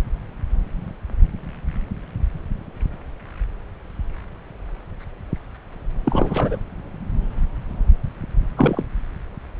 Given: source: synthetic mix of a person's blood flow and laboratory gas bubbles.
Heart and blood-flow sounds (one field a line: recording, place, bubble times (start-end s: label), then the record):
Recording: Doppler ultrasound of blood flow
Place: subclavian vein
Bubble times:
6.05-6.58 s: bubbles
8.57-8.83 s: bubbles
From the record:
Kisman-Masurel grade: 222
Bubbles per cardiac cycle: several, 3 to 8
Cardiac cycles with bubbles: 10 to 50%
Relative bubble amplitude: moderate (0.250 to 0.450)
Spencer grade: 2 (many but less than half of the cardiac periods contain bubble signals, singularly or in groups)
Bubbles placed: anywhere in the cardiac cycle